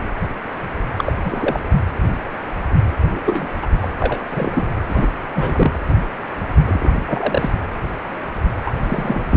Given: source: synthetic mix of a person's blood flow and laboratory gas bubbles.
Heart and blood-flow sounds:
Doppler ultrasound of blood flow; precordium
0.97-1.12 s: bubbles
1.25-1.59 s: bubbles
3.00-3.20 s: bubbles
3.26-3.48 s: bubbles
3.62-3.67 s: bubbles
3.82-3.88 s: bubbles
4.00-4.18 s: bubbles
4.29-4.67 s: bubbles
4.88-5.07 s: bubbles
5.35-5.80 s: bubbles
6.67-6.91 s: bubbles
7.08-7.50 s: bubbles
8.65-8.72 s: bubbles
8.81-9.37 s: bubbles
From the record:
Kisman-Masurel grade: 232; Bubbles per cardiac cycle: several, 3 to 8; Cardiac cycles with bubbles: 50 to 99%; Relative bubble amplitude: moderate (0.250 to 0.450); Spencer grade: 3 (all of the cardiac periods contain showers or single bubble signals, but not dominating or overriding the cardiac motion signals); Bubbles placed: anywhere in the cardiac cycle

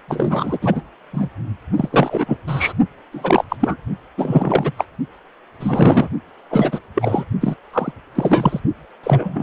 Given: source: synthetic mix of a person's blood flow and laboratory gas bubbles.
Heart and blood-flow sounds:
Doppler ultrasound of blood flow; precordium
0.08-0.58 s: bubbles
0.61-0.82 s: bubbles
1.13-1.28 s: bubbles
1.76-2.38 s: bubbles
2.47-2.73 s: bubbles
3.12-3.44 s: bubbles
3.49-3.56 s: bubbles
3.59-3.76 s: bubbles
4.17-4.71 s: bubbles
4.77-4.85 s: bubbles
5.60-6.08 s: bubbles
6.51-6.79 s: bubbles
6.95-7.24 s: bubbles
7.41-7.56 s: bubbles
7.73-7.92 s: bubbles
8.15-8.60 s: bubbles
9.03-9.43 s: bubbles
From the record:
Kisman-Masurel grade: 343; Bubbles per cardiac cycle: rolling drumbeat, 9 or more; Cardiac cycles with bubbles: 100%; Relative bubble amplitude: loud (0.450 to 0.775); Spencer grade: 3 (all of the cardiac periods contain showers or single bubble signals, but not dominating or overriding the cardiac motion signals); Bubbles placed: only in the low amplitude regions of the cardiac cycle

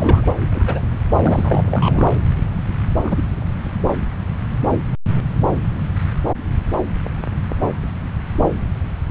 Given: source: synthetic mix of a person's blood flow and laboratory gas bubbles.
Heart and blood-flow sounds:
Doppler ultrasound of blood flow; subclavian vein
0.00-0.32 s: bubbles
0.51-0.81 s: bubbles
1.23-2.06 s: bubbles
3.02-3.23 s: bubbles
From the record:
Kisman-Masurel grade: 222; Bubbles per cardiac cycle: several, 3 to 8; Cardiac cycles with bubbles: 10 to 50%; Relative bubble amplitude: moderate (0.250 to 0.450); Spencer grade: 2 (many but less than half of the cardiac periods contain bubble signals, singularly or in groups); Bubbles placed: anywhere in the cardiac cycle

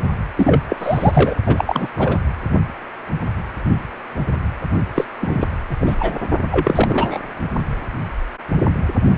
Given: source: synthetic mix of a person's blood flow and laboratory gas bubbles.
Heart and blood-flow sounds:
Doppler ultrasound of blood flow; precordium
0.37-0.61 s: bubbles
0.69-0.76 s: bubbles
0.79-1.35 s: bubbles
1.46-1.89 s: bubbles
1.96-2.19 s: bubbles
4.95-5.04 s: bubbles
5.21-5.50 s: bubbles
5.69-5.77 s: bubbles
5.80-6.22 s: bubbles
6.51-7.18 s: bubbles
From the record:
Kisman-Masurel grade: 333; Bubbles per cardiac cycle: rolling drumbeat, 9 or more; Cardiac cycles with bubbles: 50 to 99%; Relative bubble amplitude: loud (0.450 to 0.775); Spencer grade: 3 (all of the cardiac periods contain showers or single bubble signals, but not dominating or overriding the cardiac motion signals); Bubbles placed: only in the low amplitude regions of the cardiac cycle

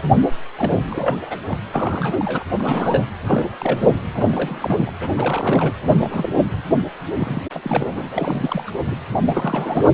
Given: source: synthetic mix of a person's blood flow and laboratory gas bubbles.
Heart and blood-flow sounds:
Doppler ultrasound of blood flow; precordium
0.00-0.04 s: bubbles
0.55-0.82 s: bubbles
0.89-1.19 s: bubbles
1.21-1.38 s: bubbles
1.48-1.58 s: bubbles
1.73-2.17 s: bubbles
2.20-2.44 s: bubbles
2.58-3.05 s: bubbles
3.26-3.46 s: bubbles
3.60-4.00 s: bubbles
4.14-4.93 s: bubbles
4.99-5.74 s: bubbles
5.83-6.29 s: bubbles
6.37-6.46 s: bubbles
7.08-7.42 s: bubbles
7.52-8.71 s: bubbles
8.84-8.99 s: bubbles
9.13-9.20 s: bubbles
9.25-9.89 s: bubbles
From the record:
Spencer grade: 3 (all of the cardiac periods contain showers or single bubble signals, but not dominating or overriding the cardiac motion signals); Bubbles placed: anywhere in the cardiac cycle

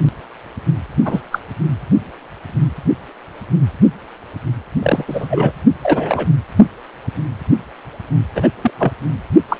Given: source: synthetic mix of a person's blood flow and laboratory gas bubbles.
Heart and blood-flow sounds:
Doppler ultrasound of blood flow; precordium
1.04-1.20 s: bubbles
1.31-1.39 s: bubbles
4.83-5.04 s: bubbles
5.08-5.52 s: bubbles
5.83-6.28 s: bubbles
8.35-8.48 s: bubbles
8.61-8.71 s: bubbles
8.79-8.92 s: bubbles
9.48-9.57 s: bubbles
From the record:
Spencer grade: 2 (many but less than half of the cardiac periods contain bubble signals, singularly or in groups); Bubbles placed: anywhere in the cardiac cycle

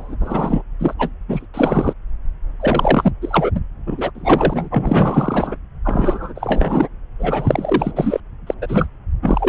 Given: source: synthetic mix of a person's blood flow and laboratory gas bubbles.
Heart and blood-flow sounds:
Doppler ultrasound of blood flow; subclavian vein
0.00-0.16 s: bubbles
0.20-0.62 s: bubbles
0.79-0.94 s: bubbles
0.99-1.09 s: bubbles
1.28-1.46 s: bubbles
1.54-1.93 s: bubbles
2.60-3.11 s: bubbles
3.21-3.50 s: bubbles
3.55-3.60 s: bubbles
3.86-4.11 s: bubbles
4.15-5.56 s: bubbles
5.84-6.88 s: bubbles
7.19-7.92 s: bubbles
7.96-8.20 s: bubbles
8.46-8.54 s: bubbles
8.62-8.87 s: bubbles
9.22-9.49 s: bubbles
From the record:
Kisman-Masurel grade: 333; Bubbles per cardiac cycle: rolling drumbeat, 9 or more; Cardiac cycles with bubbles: 50 to 99%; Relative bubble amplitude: loud (0.450 to 0.775); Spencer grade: 3 (all of the cardiac periods contain showers or single bubble signals, but not dominating or overriding the cardiac motion signals); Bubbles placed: anywhere in the cardiac cycle

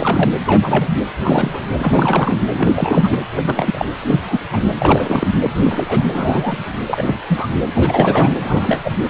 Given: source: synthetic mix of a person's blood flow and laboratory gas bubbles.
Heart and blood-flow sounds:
Doppler ultrasound of blood flow; precordium
0.00-0.30 s: bubbles
0.46-0.88 s: bubbles
1.23-1.62 s: bubbles
1.80-2.36 s: bubbles
2.53-3.18 s: bubbles
3.36-3.85 s: bubbles
4.02-4.20 s: bubbles
4.24-4.38 s: bubbles
4.52-4.62 s: bubbles
4.78-5.27 s: bubbles
5.42-5.51 s: bubbles
5.62-6.03 s: bubbles
6.13-6.63 s: bubbles
6.88-7.19 s: bubbles
7.28-7.47 s: bubbles
7.75-8.35 s: bubbles
8.38-8.92 s: bubbles
From the record:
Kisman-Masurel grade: 242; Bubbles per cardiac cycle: several, 3 to 8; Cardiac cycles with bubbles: 100%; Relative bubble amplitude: moderate (0.250 to 0.450); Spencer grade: 3 (all of the cardiac periods contain showers or single bubble signals, but not dominating or overriding the cardiac motion signals); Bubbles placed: anywhere in the cardiac cycle

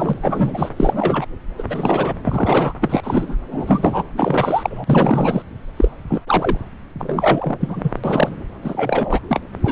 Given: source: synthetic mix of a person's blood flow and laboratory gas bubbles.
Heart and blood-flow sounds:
Doppler ultrasound of blood flow; subclavian vein
0.00-0.13 s: bubbles
0.23-0.69 s: bubbles
0.77-1.27 s: bubbles
1.58-1.63 s: bubbles
1.69-2.13 s: bubbles
2.24-2.73 s: bubbles
2.80-3.36 s: bubbles
3.51-4.04 s: bubbles
4.17-5.42 s: bubbles
5.77-5.89 s: bubbles
6.08-6.21 s: bubbles
6.27-6.58 s: bubbles
6.99-7.91 s: bubbles
8.04-8.32 s: bubbles
8.62-9.21 s: bubbles
9.28-9.40 s: bubbles
9.63-9.72 s: bubbles
From the record:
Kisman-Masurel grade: 343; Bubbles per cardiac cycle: rolling drumbeat, 9 or more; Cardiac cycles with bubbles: 100%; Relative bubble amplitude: loud (0.450 to 0.775); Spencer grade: 3 (all of the cardiac periods contain showers or single bubble signals, but not dominating or overriding the cardiac motion signals); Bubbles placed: anywhere in the cardiac cycle

